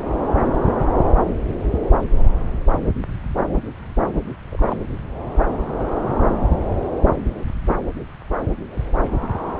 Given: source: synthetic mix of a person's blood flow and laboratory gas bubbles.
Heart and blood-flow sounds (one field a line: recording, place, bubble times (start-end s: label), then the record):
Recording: Doppler ultrasound of blood flow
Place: subclavian vein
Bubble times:
4.49-4.76 s: bubbles
From the record:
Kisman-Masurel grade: 111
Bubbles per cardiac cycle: 1 to 2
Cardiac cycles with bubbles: 1 to 10%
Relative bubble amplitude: barely perceptible (0.100 to 0.250)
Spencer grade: 1 (occasional bubble signal discernible with the cardiac motion signal, with majority of cardiac periods free of bubbles)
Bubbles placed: anywhere in the cardiac cycle